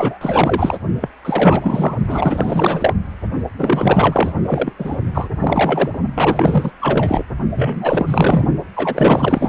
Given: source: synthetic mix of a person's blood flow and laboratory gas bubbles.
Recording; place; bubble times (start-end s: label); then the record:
Doppler ultrasound of blood flow; precordium
0.00-0.78 s: bubbles
1.00-1.08 s: bubbles
1.25-1.96 s: bubbles
2.08-2.94 s: bubbles
3.58-4.33 s: bubbles
4.46-4.72 s: bubbles
4.79-4.97 s: bubbles
5.14-5.29 s: bubbles
5.40-6.00 s: bubbles
6.14-6.72 s: bubbles
6.79-7.25 s: bubbles
7.54-8.47 s: bubbles
8.76-9.49 s: bubbles
From the record:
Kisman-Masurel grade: 444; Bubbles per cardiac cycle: continuous sound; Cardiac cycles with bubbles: 100%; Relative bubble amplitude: maximal (0.775 to 0.999); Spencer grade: 4 (maximum detectable bubble signal sounding continuously throughout systole and diastole of every cardiac period, and overriding the amplitude of the normal cardiac signals); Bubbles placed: only in the low amplitude regions of the cardiac cycle